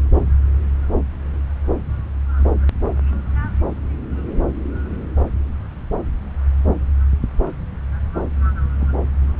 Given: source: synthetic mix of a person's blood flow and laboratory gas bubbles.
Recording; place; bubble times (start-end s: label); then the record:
Doppler ultrasound of blood flow; subclavian vein
8.72-8.87 s: bubbles
From the record:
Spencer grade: 1 (occasional bubble signal discernible with the cardiac motion signal, with majority of cardiac periods free of bubbles); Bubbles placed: anywhere in the cardiac cycle